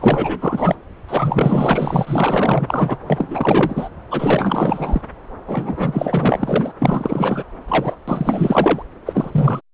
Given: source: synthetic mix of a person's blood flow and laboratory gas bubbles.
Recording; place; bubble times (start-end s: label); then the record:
Doppler ultrasound of blood flow; subclavian vein
0.00-0.75 s: bubbles
1.08-2.97 s: bubbles
3.06-3.89 s: bubbles
4.10-5.01 s: bubbles
5.47-6.72 s: bubbles
6.79-7.44 s: bubbles
7.67-7.96 s: bubbles
8.08-8.83 s: bubbles
9.06-9.61 s: bubbles
From the record:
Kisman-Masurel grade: 444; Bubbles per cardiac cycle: continuous sound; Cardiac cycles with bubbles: 100%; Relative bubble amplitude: maximal (0.775 to 0.999); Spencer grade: 4 (maximum detectable bubble signal sounding continuously throughout systole and diastole of every cardiac period, and overriding the amplitude of the normal cardiac signals); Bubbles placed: anywhere in the cardiac cycle